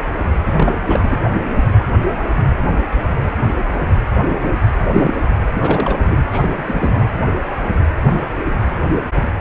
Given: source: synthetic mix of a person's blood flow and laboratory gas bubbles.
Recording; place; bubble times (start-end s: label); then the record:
Doppler ultrasound of blood flow; precordium
0.45-0.79 s: bubbles
0.86-1.18 s: bubbles
4.94-5.35 s: bubbles
5.59-6.16 s: bubbles
6.31-6.50 s: bubbles
6.54-6.62 s: bubbles
6.67-7.08 s: bubbles
From the record:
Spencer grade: 2 (many but less than half of the cardiac periods contain bubble signals, singularly or in groups); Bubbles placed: anywhere in the cardiac cycle